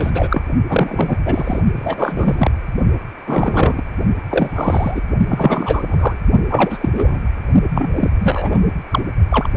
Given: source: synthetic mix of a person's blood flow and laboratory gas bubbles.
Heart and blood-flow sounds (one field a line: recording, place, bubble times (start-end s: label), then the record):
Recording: Doppler ultrasound of blood flow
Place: precordium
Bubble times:
0.00-0.43 s: bubbles
0.68-1.18 s: bubbles
1.25-1.60 s: bubbles
1.76-2.51 s: bubbles
3.27-3.83 s: bubbles
4.29-5.02 s: bubbles
5.29-6.21 s: bubbles
6.50-6.78 s: bubbles
6.80-6.89 s: bubbles
6.94-7.21 s: bubbles
7.71-8.10 s: bubbles
8.20-8.62 s: bubbles
8.90-9.01 s: bubbles
9.30-9.47 s: bubbles
9.54-9.57 s: bubbles
From the record:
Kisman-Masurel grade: 343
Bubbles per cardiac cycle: rolling drumbeat, 9 or more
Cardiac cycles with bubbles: 100%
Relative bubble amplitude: loud (0.450 to 0.775)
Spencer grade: 3 (all of the cardiac periods contain showers or single bubble signals, but not dominating or overriding the cardiac motion signals)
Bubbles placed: only in the low amplitude regions of the cardiac cycle